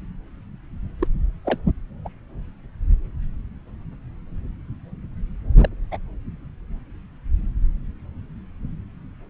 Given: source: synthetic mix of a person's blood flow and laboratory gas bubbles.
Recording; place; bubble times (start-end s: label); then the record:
Doppler ultrasound of blood flow; subclavian vein
1.00-1.07 s: bubbles
1.45-1.59 s: bubbles
2.05-2.09 s: bubbles
5.61-5.69 s: bubbles
5.91-5.98 s: bubbles
From the record:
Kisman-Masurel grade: 122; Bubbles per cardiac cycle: 1 to 2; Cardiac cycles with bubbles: 10 to 50%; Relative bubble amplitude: moderate (0.250 to 0.450); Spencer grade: 2 (many but less than half of the cardiac periods contain bubble signals, singularly or in groups); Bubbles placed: anywhere in the cardiac cycle